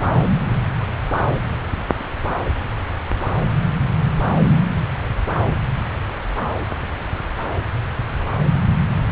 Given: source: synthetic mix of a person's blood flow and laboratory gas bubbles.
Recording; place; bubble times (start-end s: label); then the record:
Doppler ultrasound of blood flow; subclavian vein
no bubbles
From the record:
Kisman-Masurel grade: 000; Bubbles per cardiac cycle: 0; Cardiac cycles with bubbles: 0%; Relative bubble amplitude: no bubbles discernible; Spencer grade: 0 (complete lack of bubble signals)